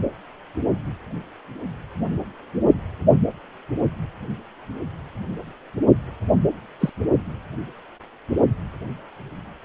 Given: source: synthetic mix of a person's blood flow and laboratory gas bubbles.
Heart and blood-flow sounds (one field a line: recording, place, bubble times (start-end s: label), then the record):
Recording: Doppler ultrasound of blood flow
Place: precordium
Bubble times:
6.80-6.90 s: bubbles
From the record:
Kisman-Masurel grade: 112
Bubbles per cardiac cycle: 1 to 2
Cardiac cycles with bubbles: 1 to 10%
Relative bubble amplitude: moderate (0.250 to 0.450)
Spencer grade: 1 (occasional bubble signal discernible with the cardiac motion signal, with majority of cardiac periods free of bubbles)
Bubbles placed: only in the low amplitude regions of the cardiac cycle